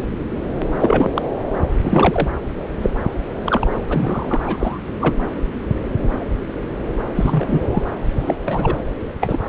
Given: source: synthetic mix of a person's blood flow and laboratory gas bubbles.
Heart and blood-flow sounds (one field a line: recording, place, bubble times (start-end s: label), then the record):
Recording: Doppler ultrasound of blood flow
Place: subclavian vein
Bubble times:
0.80-1.10 s: bubbles
1.14-1.22 s: bubbles
1.84-2.28 s: bubbles
2.81-2.90 s: bubbles
3.44-3.64 s: bubbles
3.89-4.42 s: bubbles
4.44-4.79 s: bubbles
5.00-5.16 s: bubbles
7.15-7.83 s: bubbles
8.15-8.34 s: bubbles
8.45-8.76 s: bubbles
9.21-9.49 s: bubbles
From the record:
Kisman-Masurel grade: 233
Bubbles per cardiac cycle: several, 3 to 8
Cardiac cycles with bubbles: 50 to 99%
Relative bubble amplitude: loud (0.450 to 0.775)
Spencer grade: 3 (all of the cardiac periods contain showers or single bubble signals, but not dominating or overriding the cardiac motion signals)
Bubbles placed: anywhere in the cardiac cycle